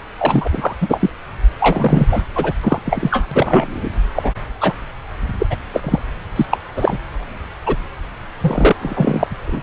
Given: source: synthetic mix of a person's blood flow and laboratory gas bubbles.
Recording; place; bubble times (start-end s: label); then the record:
Doppler ultrasound of blood flow; subclavian vein
0.18-0.47 s: bubbles
0.52-0.75 s: bubbles
0.80-1.10 s: bubbles
1.59-2.23 s: bubbles
2.35-2.52 s: bubbles
2.63-2.79 s: bubbles
2.84-3.27 s: bubbles
3.31-3.91 s: bubbles
4.15-4.32 s: bubbles
4.60-4.72 s: bubbles
5.38-5.47 s: bubbles
5.50-5.56 s: bubbles
5.73-5.99 s: bubbles
6.35-6.46 s: bubbles
6.51-6.57 s: bubbles
6.75-6.98 s: bubbles
7.65-7.76 s: bubbles
8.41-8.72 s: bubbles
8.81-9.27 s: bubbles
9.46-9.63 s: bubbles
From the record:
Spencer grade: 3 (all of the cardiac periods contain showers or single bubble signals, but not dominating or overriding the cardiac motion signals); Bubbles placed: anywhere in the cardiac cycle